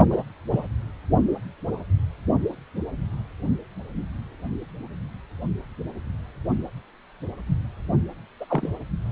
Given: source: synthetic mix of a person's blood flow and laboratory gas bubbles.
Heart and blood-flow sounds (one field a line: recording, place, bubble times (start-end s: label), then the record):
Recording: Doppler ultrasound of blood flow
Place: precordium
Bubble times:
0.10-0.23 s: bubbles
0.49-0.67 s: bubbles
8.40-8.45 s: bubbles
8.48-8.69 s: bubbles
From the record:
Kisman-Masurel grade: 122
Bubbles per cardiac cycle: 1 to 2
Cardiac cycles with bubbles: 10 to 50%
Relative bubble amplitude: moderate (0.250 to 0.450)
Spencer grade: 2 (many but less than half of the cardiac periods contain bubble signals, singularly or in groups)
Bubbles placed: only in the low amplitude regions of the cardiac cycle